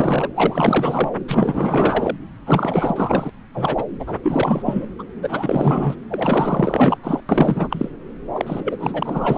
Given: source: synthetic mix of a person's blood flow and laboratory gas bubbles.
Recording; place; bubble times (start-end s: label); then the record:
Doppler ultrasound of blood flow; subclavian vein
0.00-0.28 s: bubbles
0.35-1.09 s: bubbles
1.28-2.17 s: bubbles
2.46-3.30 s: bubbles
3.54-3.85 s: bubbles
3.99-4.19 s: bubbles
4.23-4.62 s: bubbles
4.65-4.85 s: bubbles
4.99-5.04 s: bubbles
5.21-5.96 s: bubbles
6.08-6.98 s: bubbles
7.04-7.21 s: bubbles
7.29-7.89 s: bubbles
8.34-9.38 s: bubbles
From the record:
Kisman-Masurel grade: 444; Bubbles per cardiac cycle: continuous sound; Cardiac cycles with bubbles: 100%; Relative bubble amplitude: maximal (0.775 to 0.999); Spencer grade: 4 (maximum detectable bubble signal sounding continuously throughout systole and diastole of every cardiac period, and overriding the amplitude of the normal cardiac signals); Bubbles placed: anywhere in the cardiac cycle